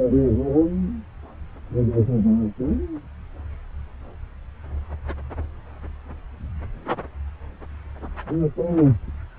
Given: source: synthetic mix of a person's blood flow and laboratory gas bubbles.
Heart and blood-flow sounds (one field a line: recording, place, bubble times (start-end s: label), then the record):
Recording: Doppler ultrasound of blood flow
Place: subclavian vein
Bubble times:
no bubbles
From the record:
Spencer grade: 0 (complete lack of bubble signals)